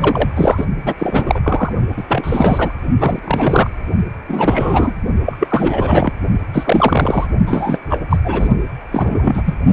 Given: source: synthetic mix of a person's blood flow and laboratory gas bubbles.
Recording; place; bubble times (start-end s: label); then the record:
Doppler ultrasound of blood flow; precordium
0.00-0.29 s: bubbles
0.35-0.66 s: bubbles
0.85-0.93 s: bubbles
0.98-1.40 s: bubbles
1.42-1.72 s: bubbles
1.97-2.04 s: bubbles
2.08-2.73 s: bubbles
2.98-3.19 s: bubbles
3.24-3.70 s: bubbles
4.26-4.95 s: bubbles
5.26-6.12 s: bubbles
6.53-7.27 s: bubbles
7.46-7.80 s: bubbles
7.89-7.98 s: bubbles
8.10-8.17 s: bubbles
8.24-8.48 s: bubbles
8.91-9.54 s: bubbles
From the record:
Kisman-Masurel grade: 343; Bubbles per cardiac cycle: rolling drumbeat, 9 or more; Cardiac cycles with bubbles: 100%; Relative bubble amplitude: loud (0.450 to 0.775); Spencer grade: 3 (all of the cardiac periods contain showers or single bubble signals, but not dominating or overriding the cardiac motion signals); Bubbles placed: only in the low amplitude regions of the cardiac cycle